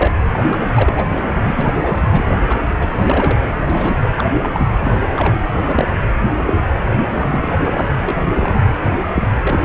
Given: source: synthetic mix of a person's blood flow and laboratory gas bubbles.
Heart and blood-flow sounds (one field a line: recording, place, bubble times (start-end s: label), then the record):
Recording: Doppler ultrasound of blood flow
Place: precordium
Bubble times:
0.00-0.11 s: bubbles
0.30-0.69 s: bubbles
0.77-1.09 s: bubbles
1.15-1.25 s: bubbles
1.46-2.07 s: bubbles
2.10-2.35 s: bubbles
2.48-2.61 s: bubbles
2.79-3.39 s: bubbles
3.65-4.09 s: bubbles
4.15-4.26 s: bubbles
4.42-4.67 s: bubbles
4.84-5.00 s: bubbles
5.16-5.37 s: bubbles
5.56-5.87 s: bubbles
6.45-6.61 s: bubbles
6.91-7.04 s: bubbles
7.09-7.58 s: bubbles
7.63-7.89 s: bubbles
8.04-8.15 s: bubbles
8.25-8.54 s: bubbles
9.14-9.22 s: bubbles
9.41-9.64 s: bubbles
From the record:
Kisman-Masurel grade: 342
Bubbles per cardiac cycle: rolling drumbeat, 9 or more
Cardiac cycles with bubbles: 100%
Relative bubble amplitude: moderate (0.250 to 0.450)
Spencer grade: 3 (all of the cardiac periods contain showers or single bubble signals, but not dominating or overriding the cardiac motion signals)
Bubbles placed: anywhere in the cardiac cycle